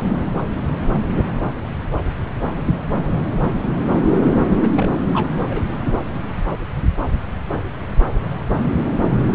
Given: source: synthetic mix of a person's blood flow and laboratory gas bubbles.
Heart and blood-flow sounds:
Doppler ultrasound of blood flow; subclavian vein
4.34-4.44 s: bubbles
4.57-4.67 s: bubbles
4.76-4.89 s: bubbles
5.12-5.30 s: bubbles
5.50-5.62 s: bubbles
5.99-6.05 s: bubbles
From the record:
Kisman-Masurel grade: 212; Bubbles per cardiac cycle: several, 3 to 8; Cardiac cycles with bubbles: 1 to 10%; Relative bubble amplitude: moderate (0.250 to 0.450); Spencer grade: 1 (occasional bubble signal discernible with the cardiac motion signal, with majority of cardiac periods free of bubbles); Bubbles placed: anywhere in the cardiac cycle

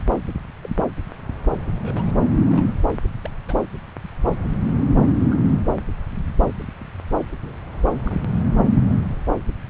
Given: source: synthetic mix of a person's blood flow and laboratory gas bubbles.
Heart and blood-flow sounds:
Doppler ultrasound of blood flow; subclavian vein
0.00-0.02 s: bubbles
0.62-0.70 s: bubbles
1.67-2.11 s: bubbles
2.36-2.42 s: bubbles
2.46-2.73 s: bubbles
3.23-3.29 s: bubbles
3.48-3.54 s: bubbles
5.31-5.35 s: bubbles
7.42-7.55 s: bubbles
8.04-8.24 s: bubbles
From the record:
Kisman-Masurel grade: 121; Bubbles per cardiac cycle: 1 to 2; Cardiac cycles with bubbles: 10 to 50%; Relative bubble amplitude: barely perceptible (0.100 to 0.250); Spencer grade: 2 (many but less than half of the cardiac periods contain bubble signals, singularly or in groups); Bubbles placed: anywhere in the cardiac cycle

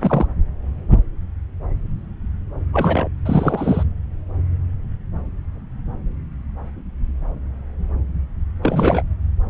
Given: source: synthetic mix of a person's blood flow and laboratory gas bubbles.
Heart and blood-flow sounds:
Doppler ultrasound of blood flow; subclavian vein
0.00-0.27 s: bubbles
2.73-3.08 s: bubbles
3.25-3.83 s: bubbles
8.62-9.02 s: bubbles
From the record:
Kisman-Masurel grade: 222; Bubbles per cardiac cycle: several, 3 to 8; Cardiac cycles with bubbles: 10 to 50%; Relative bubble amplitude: moderate (0.250 to 0.450); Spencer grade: 2 (many but less than half of the cardiac periods contain bubble signals, singularly or in groups); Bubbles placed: anywhere in the cardiac cycle

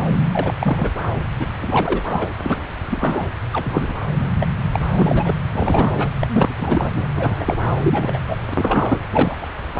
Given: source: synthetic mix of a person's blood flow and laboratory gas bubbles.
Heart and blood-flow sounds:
Doppler ultrasound of blood flow; subclavian vein
0.32-0.54 s: bubbles
0.57-0.93 s: bubbles
1.39-1.47 s: bubbles
1.61-2.29 s: bubbles
2.41-2.68 s: bubbles
2.88-3.29 s: bubbles
3.52-4.00 s: bubbles
4.18-4.34 s: bubbles
4.39-4.49 s: bubbles
4.63-4.69 s: bubbles
4.72-4.79 s: bubbles
4.98-5.33 s: bubbles
5.51-6.08 s: bubbles
6.21-6.27 s: bubbles
6.33-6.55 s: bubbles
6.59-7.06 s: bubbles
7.16-7.57 s: bubbles
7.82-8.20 s: bubbles
8.26-8.37 s: bubbles
8.50-9.03 s: bubbles
9.11-9.46 s: bubbles
From the record:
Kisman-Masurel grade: 243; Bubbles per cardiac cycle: several, 3 to 8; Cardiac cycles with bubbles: 100%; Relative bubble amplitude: loud (0.450 to 0.775); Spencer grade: 3 (all of the cardiac periods contain showers or single bubble signals, but not dominating or overriding the cardiac motion signals); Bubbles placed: anywhere in the cardiac cycle

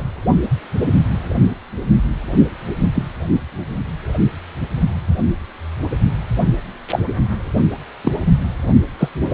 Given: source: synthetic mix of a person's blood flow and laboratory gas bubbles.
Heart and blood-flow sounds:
Doppler ultrasound of blood flow; precordium
0.00-0.04 s: bubbles
2.95-3.05 s: bubbles
6.89-6.99 s: bubbles
8.04-8.12 s: bubbles
8.99-9.09 s: bubbles
9.21-9.34 s: bubbles
From the record:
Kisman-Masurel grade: 123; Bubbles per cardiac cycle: 1 to 2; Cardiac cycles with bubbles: 10 to 50%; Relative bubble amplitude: loud (0.450 to 0.775); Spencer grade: 2 (many but less than half of the cardiac periods contain bubble signals, singularly or in groups); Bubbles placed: only in the low amplitude regions of the cardiac cycle

